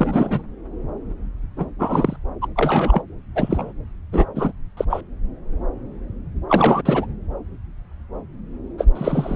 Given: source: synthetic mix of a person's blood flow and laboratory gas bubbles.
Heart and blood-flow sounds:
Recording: Doppler ultrasound of blood flow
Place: subclavian vein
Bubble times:
0.00-0.43 s: bubbles
1.56-1.70 s: bubbles
1.79-2.17 s: bubbles
2.41-2.48 s: bubbles
2.56-3.02 s: bubbles
3.35-3.72 s: bubbles
4.12-4.25 s: bubbles
4.35-4.52 s: bubbles
4.77-4.85 s: bubbles
4.89-5.01 s: bubbles
6.48-6.82 s: bubbles
6.85-7.06 s: bubbles
8.78-8.86 s: bubbles
8.95-9.36 s: bubbles
From the record:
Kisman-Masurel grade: 223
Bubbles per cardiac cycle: several, 3 to 8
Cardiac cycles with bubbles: 10 to 50%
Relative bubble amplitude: loud (0.450 to 0.775)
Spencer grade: 2 (many but less than half of the cardiac periods contain bubble signals, singularly or in groups)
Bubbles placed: anywhere in the cardiac cycle

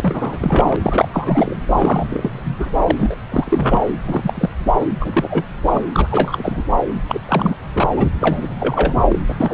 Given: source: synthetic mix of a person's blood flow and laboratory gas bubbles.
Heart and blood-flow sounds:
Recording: Doppler ultrasound of blood flow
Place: subclavian vein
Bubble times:
0.00-0.77 s: bubbles
0.83-1.08 s: bubbles
1.12-1.56 s: bubbles
1.76-2.69 s: bubbles
2.81-3.16 s: bubbles
3.31-3.83 s: bubbles
4.07-4.50 s: bubbles
4.80-4.86 s: bubbles
5.00-5.45 s: bubbles
5.65-5.81 s: bubbles
5.93-6.08 s: bubbles
6.10-6.62 s: bubbles
7.08-7.19 s: bubbles
7.28-7.56 s: bubbles
7.72-7.89 s: bubbles
7.96-8.09 s: bubbles
8.20-9.01 s: bubbles
9.08-9.19 s: bubbles
9.29-9.35 s: bubbles
9.40-9.53 s: bubbles
From the record:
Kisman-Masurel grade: 343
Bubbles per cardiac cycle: rolling drumbeat, 9 or more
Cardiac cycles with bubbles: 100%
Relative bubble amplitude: loud (0.450 to 0.775)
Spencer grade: 3 (all of the cardiac periods contain showers or single bubble signals, but not dominating or overriding the cardiac motion signals)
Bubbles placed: anywhere in the cardiac cycle

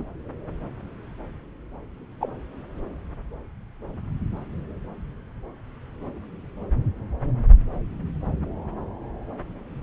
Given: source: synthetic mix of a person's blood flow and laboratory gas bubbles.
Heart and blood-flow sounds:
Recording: Doppler ultrasound of blood flow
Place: subclavian vein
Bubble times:
0.00-0.04 s: bubbles
2.20-2.28 s: bubbles
From the record:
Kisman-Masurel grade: 122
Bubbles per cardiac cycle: 1 to 2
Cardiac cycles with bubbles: 10 to 50%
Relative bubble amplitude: moderate (0.250 to 0.450)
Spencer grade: 2 (many but less than half of the cardiac periods contain bubble signals, singularly or in groups)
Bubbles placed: anywhere in the cardiac cycle

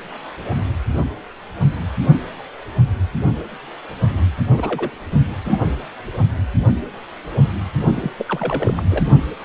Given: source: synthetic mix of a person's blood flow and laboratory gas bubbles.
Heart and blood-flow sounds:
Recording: Doppler ultrasound of blood flow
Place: precordium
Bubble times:
4.57-4.91 s: bubbles
5.44-5.68 s: bubbles
7.95-8.12 s: bubbles
8.18-8.82 s: bubbles
8.89-9.04 s: bubbles
From the record:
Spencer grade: 2 (many but less than half of the cardiac periods contain bubble signals, singularly or in groups)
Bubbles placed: only in the low amplitude regions of the cardiac cycle

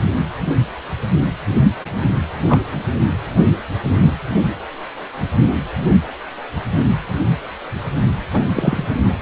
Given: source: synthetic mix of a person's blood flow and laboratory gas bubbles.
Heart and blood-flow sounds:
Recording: Doppler ultrasound of blood flow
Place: precordium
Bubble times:
2.48-2.60 s: bubbles
3.98-4.13 s: bubbles
8.33-8.46 s: bubbles
8.54-8.84 s: bubbles
From the record:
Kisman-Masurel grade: 123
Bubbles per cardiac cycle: 1 to 2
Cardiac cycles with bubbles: 10 to 50%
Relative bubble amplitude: loud (0.450 to 0.775)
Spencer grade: 2 (many but less than half of the cardiac periods contain bubble signals, singularly or in groups)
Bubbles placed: only in the low amplitude regions of the cardiac cycle

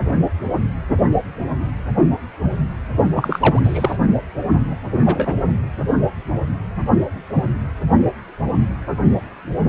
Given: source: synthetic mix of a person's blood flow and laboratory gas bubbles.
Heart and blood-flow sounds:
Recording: Doppler ultrasound of blood flow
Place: precordium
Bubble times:
3.15-3.60 s: bubbles
3.63-3.97 s: bubbles
5.02-5.35 s: bubbles
From the record:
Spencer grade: 1 (occasional bubble signal discernible with the cardiac motion signal, with majority of cardiac periods free of bubbles)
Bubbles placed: only in the low amplitude regions of the cardiac cycle

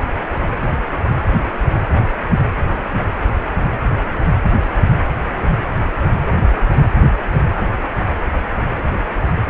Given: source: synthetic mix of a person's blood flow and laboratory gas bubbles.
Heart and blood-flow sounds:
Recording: Doppler ultrasound of blood flow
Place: precordium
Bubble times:
no bubbles
From the record:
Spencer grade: 0 (complete lack of bubble signals)

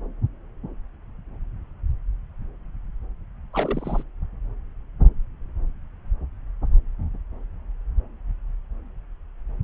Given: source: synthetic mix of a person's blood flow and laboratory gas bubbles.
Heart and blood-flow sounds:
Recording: Doppler ultrasound of blood flow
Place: subclavian vein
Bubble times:
3.53-4.03 s: bubbles
From the record:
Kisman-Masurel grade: 212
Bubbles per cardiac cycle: several, 3 to 8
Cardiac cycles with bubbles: 1 to 10%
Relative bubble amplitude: moderate (0.250 to 0.450)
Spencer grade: 1 (occasional bubble signal discernible with the cardiac motion signal, with majority of cardiac periods free of bubbles)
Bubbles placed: anywhere in the cardiac cycle

